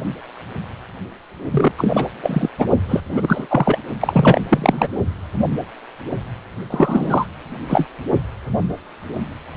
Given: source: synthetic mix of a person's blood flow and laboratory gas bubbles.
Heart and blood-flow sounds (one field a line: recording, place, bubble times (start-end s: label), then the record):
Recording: Doppler ultrasound of blood flow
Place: precordium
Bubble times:
1.50-1.71 s: bubbles
1.77-2.06 s: bubbles
2.23-2.49 s: bubbles
2.58-2.66 s: bubbles
2.88-3.00 s: bubbles
3.08-3.78 s: bubbles
4.01-4.41 s: bubbles
4.49-4.88 s: bubbles
6.70-7.26 s: bubbles
7.68-7.87 s: bubbles
From the record:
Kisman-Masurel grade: 333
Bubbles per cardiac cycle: rolling drumbeat, 9 or more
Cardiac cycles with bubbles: 50 to 99%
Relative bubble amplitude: loud (0.450 to 0.775)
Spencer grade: 3 (all of the cardiac periods contain showers or single bubble signals, but not dominating or overriding the cardiac motion signals)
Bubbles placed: only in the low amplitude regions of the cardiac cycle